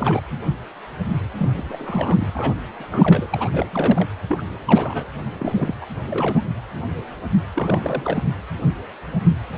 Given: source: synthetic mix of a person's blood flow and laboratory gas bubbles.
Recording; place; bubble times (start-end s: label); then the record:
Doppler ultrasound of blood flow; precordium
0.00-0.22 s: bubbles
1.38-1.51 s: bubbles
1.57-2.32 s: bubbles
2.34-2.54 s: bubbles
2.78-3.26 s: bubbles
3.30-4.08 s: bubbles
4.29-4.42 s: bubbles
4.66-5.05 s: bubbles
5.38-5.75 s: bubbles
5.81-5.85 s: bubbles
6.09-6.42 s: bubbles
7.56-8.23 s: bubbles
From the record:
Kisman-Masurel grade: 332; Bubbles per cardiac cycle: rolling drumbeat, 9 or more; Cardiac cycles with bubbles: 50 to 99%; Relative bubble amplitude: moderate (0.250 to 0.450); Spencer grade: 3 (all of the cardiac periods contain showers or single bubble signals, but not dominating or overriding the cardiac motion signals); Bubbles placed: anywhere in the cardiac cycle